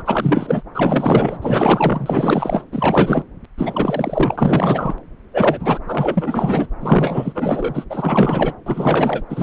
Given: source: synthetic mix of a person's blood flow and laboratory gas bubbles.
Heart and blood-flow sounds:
Doppler ultrasound of blood flow; subclavian vein
0.00-0.03 s: bubbles
0.05-0.62 s: bubbles
0.74-1.39 s: bubbles
1.42-2.64 s: bubbles
2.72-3.24 s: bubbles
3.58-4.95 s: bubbles
5.33-5.79 s: bubbles
5.87-6.68 s: bubbles
6.80-7.85 s: bubbles
7.90-8.53 s: bubbles
8.66-9.23 s: bubbles
9.29-9.43 s: bubbles
From the record:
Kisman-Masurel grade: 444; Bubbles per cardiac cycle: continuous sound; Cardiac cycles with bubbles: 100%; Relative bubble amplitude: maximal (0.775 to 0.999); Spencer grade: 4 (maximum detectable bubble signal sounding continuously throughout systole and diastole of every cardiac period, and overriding the amplitude of the normal cardiac signals); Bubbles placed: anywhere in the cardiac cycle

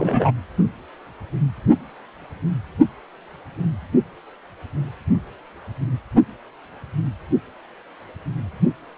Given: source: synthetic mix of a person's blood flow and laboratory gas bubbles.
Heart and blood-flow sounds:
Doppler ultrasound of blood flow; precordium
0.00-0.32 s: bubbles
From the record:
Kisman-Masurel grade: 213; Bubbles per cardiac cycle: several, 3 to 8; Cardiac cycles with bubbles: 1 to 10%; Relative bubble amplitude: loud (0.450 to 0.775); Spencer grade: 1 (occasional bubble signal discernible with the cardiac motion signal, with majority of cardiac periods free of bubbles); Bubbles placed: only in the low amplitude regions of the cardiac cycle

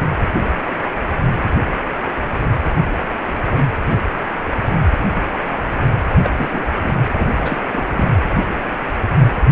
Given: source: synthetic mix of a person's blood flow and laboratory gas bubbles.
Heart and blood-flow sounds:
Doppler ultrasound of blood flow; precordium
6.10-6.49 s: bubbles
6.52-6.64 s: bubbles
6.82-7.00 s: bubbles
7.16-7.57 s: bubbles
7.71-8.19 s: bubbles
From the record:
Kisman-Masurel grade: 222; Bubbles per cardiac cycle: several, 3 to 8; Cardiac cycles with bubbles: 10 to 50%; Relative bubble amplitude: moderate (0.250 to 0.450); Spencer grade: 2 (many but less than half of the cardiac periods contain bubble signals, singularly or in groups); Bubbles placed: anywhere in the cardiac cycle

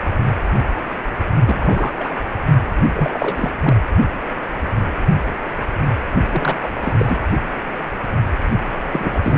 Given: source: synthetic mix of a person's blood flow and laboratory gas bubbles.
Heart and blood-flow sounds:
Doppler ultrasound of blood flow; precordium
1.46-1.92 s: bubbles
2.00-2.14 s: bubbles
2.94-3.50 s: bubbles
3.63-3.77 s: bubbles
6.31-6.58 s: bubbles
6.62-6.68 s: bubbles
6.82-6.93 s: bubbles
6.98-7.20 s: bubbles
8.71-9.19 s: bubbles
9.22-9.38 s: bubbles
From the record:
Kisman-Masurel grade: 233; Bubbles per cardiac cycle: several, 3 to 8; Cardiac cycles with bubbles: 50 to 99%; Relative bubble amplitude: loud (0.450 to 0.775); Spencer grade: 3 (all of the cardiac periods contain showers or single bubble signals, but not dominating or overriding the cardiac motion signals); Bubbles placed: anywhere in the cardiac cycle

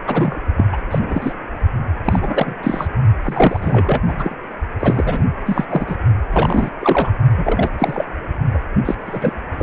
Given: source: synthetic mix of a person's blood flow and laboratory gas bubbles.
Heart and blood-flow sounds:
Doppler ultrasound of blood flow; precordium
0.07-0.39 s: bubbles
0.57-0.66 s: bubbles
0.71-0.83 s: bubbles
0.91-1.33 s: bubbles
2.04-2.54 s: bubbles
2.63-2.88 s: bubbles
3.21-4.04 s: bubbles
4.08-4.36 s: bubbles
4.79-5.25 s: bubbles
5.46-5.66 s: bubbles
5.68-5.96 s: bubbles
6.31-6.70 s: bubbles
6.80-7.11 s: bubbles
7.37-7.70 s: bubbles
7.78-8.05 s: bubbles
8.53-8.58 s: bubbles
8.85-8.95 s: bubbles
9.05-9.42 s: bubbles
9.57-9.63 s: bubbles
From the record:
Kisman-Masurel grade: 343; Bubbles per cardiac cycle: rolling drumbeat, 9 or more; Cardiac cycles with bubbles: 100%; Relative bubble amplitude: loud (0.450 to 0.775); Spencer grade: 3 (all of the cardiac periods contain showers or single bubble signals, but not dominating or overriding the cardiac motion signals); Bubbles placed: only in the low amplitude regions of the cardiac cycle

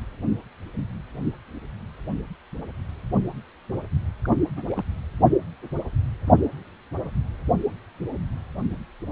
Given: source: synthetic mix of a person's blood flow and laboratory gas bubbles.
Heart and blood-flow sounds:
Doppler ultrasound of blood flow; precordium
4.25-4.40 s: bubbles
4.56-4.67 s: bubbles
4.70-4.83 s: bubbles
From the record:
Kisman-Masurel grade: 211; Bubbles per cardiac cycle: several, 3 to 8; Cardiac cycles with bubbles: 1 to 10%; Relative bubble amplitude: barely perceptible (0.100 to 0.250); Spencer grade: 1 (occasional bubble signal discernible with the cardiac motion signal, with majority of cardiac periods free of bubbles); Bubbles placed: anywhere in the cardiac cycle

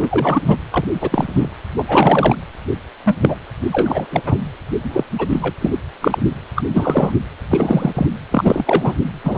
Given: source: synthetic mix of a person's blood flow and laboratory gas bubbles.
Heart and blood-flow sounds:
Doppler ultrasound of blood flow; precordium
0.00-0.42 s: bubbles
0.47-0.57 s: bubbles
0.71-0.85 s: bubbles
1.01-1.49 s: bubbles
1.78-1.84 s: bubbles
1.87-2.36 s: bubbles
3.04-3.17 s: bubbles
3.21-3.36 s: bubbles
3.72-4.06 s: bubbles
4.12-4.22 s: bubbles
4.25-4.38 s: bubbles
4.83-5.04 s: bubbles
5.18-5.54 s: bubbles
5.61-5.71 s: bubbles
6.00-6.18 s: bubbles
6.55-6.62 s: bubbles
6.73-7.12 s: bubbles
7.50-7.92 s: bubbles
7.95-8.06 s: bubbles
8.30-8.93 s: bubbles
9.23-9.38 s: bubbles
From the record:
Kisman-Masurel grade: 233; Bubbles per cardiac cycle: several, 3 to 8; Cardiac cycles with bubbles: 50 to 99%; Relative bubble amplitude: loud (0.450 to 0.775); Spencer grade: 3 (all of the cardiac periods contain showers or single bubble signals, but not dominating or overriding the cardiac motion signals); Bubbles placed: anywhere in the cardiac cycle

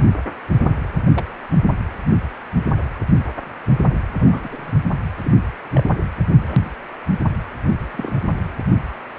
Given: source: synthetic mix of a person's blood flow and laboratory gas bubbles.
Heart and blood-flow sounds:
Doppler ultrasound of blood flow; precordium
1.14-1.25 s: bubbles
4.19-4.72 s: bubbles
5.25-5.31 s: bubbles
5.73-5.84 s: bubbles
6.42-6.70 s: bubbles
7.91-8.21 s: bubbles
From the record:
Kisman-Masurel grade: 121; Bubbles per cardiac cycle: 1 to 2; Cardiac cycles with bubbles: 10 to 50%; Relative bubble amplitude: barely perceptible (0.100 to 0.250); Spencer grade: 2 (many but less than half of the cardiac periods contain bubble signals, singularly or in groups); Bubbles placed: anywhere in the cardiac cycle

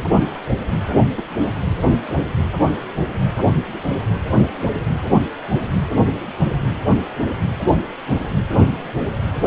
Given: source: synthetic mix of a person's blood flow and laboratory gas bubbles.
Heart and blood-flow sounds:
Doppler ultrasound of blood flow; precordium
1.16-1.24 s: bubbles
1.42-1.50 s: bubbles
5.19-5.25 s: bubbles
From the record:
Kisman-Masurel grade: 121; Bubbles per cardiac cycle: 1 to 2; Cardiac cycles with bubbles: 10 to 50%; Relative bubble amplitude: barely perceptible (0.100 to 0.250); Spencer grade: 2 (many but less than half of the cardiac periods contain bubble signals, singularly or in groups); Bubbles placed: anywhere in the cardiac cycle

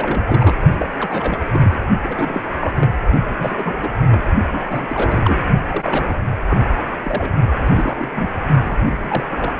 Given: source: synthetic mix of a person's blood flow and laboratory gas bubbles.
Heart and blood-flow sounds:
Doppler ultrasound of blood flow; precordium
0.00-0.22 s: bubbles
0.27-0.60 s: bubbles
0.79-0.87 s: bubbles
0.98-1.43 s: bubbles
1.54-1.78 s: bubbles
2.04-2.42 s: bubbles
2.60-2.89 s: bubbles
3.27-3.88 s: bubbles
4.09-4.24 s: bubbles
4.51-5.39 s: bubbles
5.69-6.16 s: bubbles
6.48-6.58 s: bubbles
7.04-7.30 s: bubbles
7.56-8.11 s: bubbles
8.14-8.29 s: bubbles
8.65-8.77 s: bubbles
8.87-9.25 s: bubbles
9.30-9.52 s: bubbles
From the record:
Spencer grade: 3 (all of the cardiac periods contain showers or single bubble signals, but not dominating or overriding the cardiac motion signals); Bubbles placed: only in the low amplitude regions of the cardiac cycle

